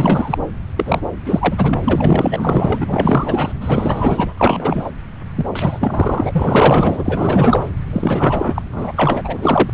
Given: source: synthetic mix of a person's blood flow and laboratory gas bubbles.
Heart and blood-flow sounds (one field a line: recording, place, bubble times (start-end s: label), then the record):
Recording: Doppler ultrasound of blood flow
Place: subclavian vein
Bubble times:
0.00-0.38 s: bubbles
0.77-1.02 s: bubbles
1.26-1.79 s: bubbles
1.84-3.52 s: bubbles
3.60-4.33 s: bubbles
4.38-4.92 s: bubbles
5.36-5.48 s: bubbles
5.55-7.64 s: bubbles
7.92-8.62 s: bubbles
8.71-8.93 s: bubbles
8.97-9.70 s: bubbles
From the record:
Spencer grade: 4 (maximum detectable bubble signal sounding continuously throughout systole and diastole of every cardiac period, and overriding the amplitude of the normal cardiac signals)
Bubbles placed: anywhere in the cardiac cycle